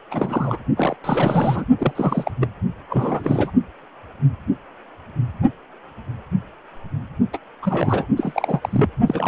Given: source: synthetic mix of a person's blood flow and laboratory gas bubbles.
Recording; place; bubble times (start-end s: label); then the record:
Doppler ultrasound of blood flow; precordium
0.10-0.57 s: bubbles
0.76-0.96 s: bubbles
1.04-1.65 s: bubbles
1.78-1.93 s: bubbles
1.95-2.31 s: bubbles
2.41-2.47 s: bubbles
2.89-3.50 s: bubbles
7.33-7.38 s: bubbles
7.62-8.06 s: bubbles
8.16-8.89 s: bubbles
9.06-9.28 s: bubbles
From the record:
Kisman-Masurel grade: 332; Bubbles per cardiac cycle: rolling drumbeat, 9 or more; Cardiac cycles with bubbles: 50 to 99%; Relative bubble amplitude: moderate (0.250 to 0.450); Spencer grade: 3 (all of the cardiac periods contain showers or single bubble signals, but not dominating or overriding the cardiac motion signals); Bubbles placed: only in the low amplitude regions of the cardiac cycle